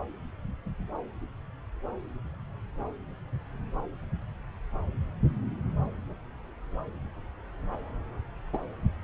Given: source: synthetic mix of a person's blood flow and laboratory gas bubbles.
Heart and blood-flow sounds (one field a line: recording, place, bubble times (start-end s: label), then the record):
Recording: Doppler ultrasound of blood flow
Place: subclavian vein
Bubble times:
8.52-8.58 s: bubbles
From the record:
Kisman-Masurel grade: 112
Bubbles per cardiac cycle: 1 to 2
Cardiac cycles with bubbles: 1 to 10%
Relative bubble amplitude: moderate (0.250 to 0.450)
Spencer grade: 1 (occasional bubble signal discernible with the cardiac motion signal, with majority of cardiac periods free of bubbles)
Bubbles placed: anywhere in the cardiac cycle